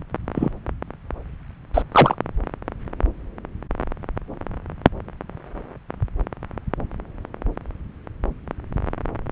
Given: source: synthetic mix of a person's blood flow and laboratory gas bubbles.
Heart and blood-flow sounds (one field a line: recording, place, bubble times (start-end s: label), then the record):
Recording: Doppler ultrasound of blood flow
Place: subclavian vein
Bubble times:
0.34-0.50 s: bubbles
1.74-1.82 s: bubbles
1.92-2.15 s: bubbles
From the record:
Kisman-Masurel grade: 123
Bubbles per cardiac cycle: 1 to 2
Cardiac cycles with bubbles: 10 to 50%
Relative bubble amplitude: loud (0.450 to 0.775)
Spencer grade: 2 (many but less than half of the cardiac periods contain bubble signals, singularly or in groups)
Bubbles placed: anywhere in the cardiac cycle